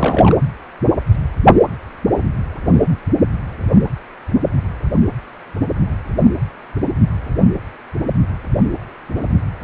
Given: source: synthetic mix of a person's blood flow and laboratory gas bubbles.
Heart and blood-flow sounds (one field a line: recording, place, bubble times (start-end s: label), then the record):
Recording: Doppler ultrasound of blood flow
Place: precordium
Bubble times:
0.00-0.36 s: bubbles
From the record:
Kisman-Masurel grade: 212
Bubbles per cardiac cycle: several, 3 to 8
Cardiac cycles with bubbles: 1 to 10%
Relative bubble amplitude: moderate (0.250 to 0.450)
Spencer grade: 1 (occasional bubble signal discernible with the cardiac motion signal, with majority of cardiac periods free of bubbles)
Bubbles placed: anywhere in the cardiac cycle